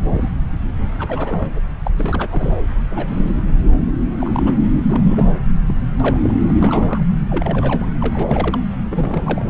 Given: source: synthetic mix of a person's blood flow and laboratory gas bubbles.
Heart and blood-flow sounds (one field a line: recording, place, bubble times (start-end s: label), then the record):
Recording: Doppler ultrasound of blood flow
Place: subclavian vein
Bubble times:
0.11-0.29 s: bubbles
0.98-1.53 s: bubbles
1.83-1.91 s: bubbles
1.98-2.27 s: bubbles
2.31-2.58 s: bubbles
2.91-3.36 s: bubbles
3.87-3.96 s: bubbles
4.20-4.55 s: bubbles
4.89-5.32 s: bubbles
5.67-5.75 s: bubbles
6.00-6.18 s: bubbles
6.22-6.34 s: bubbles
6.48-6.56 s: bubbles
6.60-7.03 s: bubbles
7.30-7.86 s: bubbles
8.00-8.58 s: bubbles
8.90-9.45 s: bubbles
From the record:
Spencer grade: 3 (all of the cardiac periods contain showers or single bubble signals, but not dominating or overriding the cardiac motion signals)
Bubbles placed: anywhere in the cardiac cycle